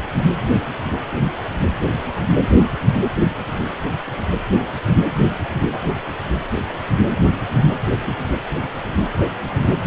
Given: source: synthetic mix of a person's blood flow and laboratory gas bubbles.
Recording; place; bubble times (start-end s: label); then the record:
Doppler ultrasound of blood flow; precordium
no bubbles
From the record:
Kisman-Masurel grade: 000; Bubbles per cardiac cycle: 0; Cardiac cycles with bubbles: 0%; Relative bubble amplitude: no bubbles discernible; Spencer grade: 0 (complete lack of bubble signals)